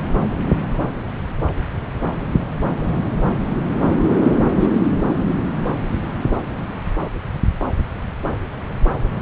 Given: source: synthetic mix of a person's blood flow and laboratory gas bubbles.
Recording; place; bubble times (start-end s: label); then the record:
Doppler ultrasound of blood flow; subclavian vein
4.61-4.67 s: bubbles
From the record:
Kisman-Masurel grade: 113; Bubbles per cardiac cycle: 1 to 2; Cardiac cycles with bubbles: 1 to 10%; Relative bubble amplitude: loud (0.450 to 0.775); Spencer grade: 1 (occasional bubble signal discernible with the cardiac motion signal, with majority of cardiac periods free of bubbles); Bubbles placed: anywhere in the cardiac cycle